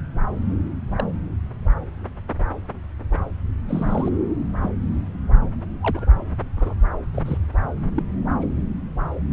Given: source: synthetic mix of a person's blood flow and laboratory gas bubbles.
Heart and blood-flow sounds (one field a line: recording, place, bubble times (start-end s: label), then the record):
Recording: Doppler ultrasound of blood flow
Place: subclavian vein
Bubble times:
0.96-1.04 s: bubbles
3.69-4.08 s: bubbles
4.62-4.70 s: bubbles
5.82-6.05 s: bubbles
6.57-6.74 s: bubbles
7.14-7.22 s: bubbles
7.25-7.38 s: bubbles
7.96-8.02 s: bubbles
8.41-8.46 s: bubbles
From the record:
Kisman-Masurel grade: 121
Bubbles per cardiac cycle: 1 to 2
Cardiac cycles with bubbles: 10 to 50%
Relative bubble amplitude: barely perceptible (0.100 to 0.250)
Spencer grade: 2 (many but less than half of the cardiac periods contain bubble signals, singularly or in groups)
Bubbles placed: anywhere in the cardiac cycle